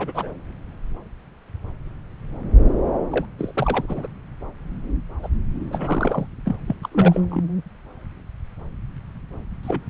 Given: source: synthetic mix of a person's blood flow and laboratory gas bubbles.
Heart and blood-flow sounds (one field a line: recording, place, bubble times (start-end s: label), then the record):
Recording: Doppler ultrasound of blood flow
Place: subclavian vein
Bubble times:
0.00-0.32 s: bubbles
3.10-3.25 s: bubbles
3.38-4.08 s: bubbles
5.23-5.29 s: bubbles
5.60-6.27 s: bubbles
6.46-6.56 s: bubbles
6.67-6.76 s: bubbles
6.83-6.89 s: bubbles
6.92-7.21 s: bubbles
7.31-7.45 s: bubbles
9.63-9.84 s: bubbles
From the record:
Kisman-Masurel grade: 332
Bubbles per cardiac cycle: rolling drumbeat, 9 or more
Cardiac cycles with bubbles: 50 to 99%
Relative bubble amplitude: moderate (0.250 to 0.450)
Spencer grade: 3 (all of the cardiac periods contain showers or single bubble signals, but not dominating or overriding the cardiac motion signals)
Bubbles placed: anywhere in the cardiac cycle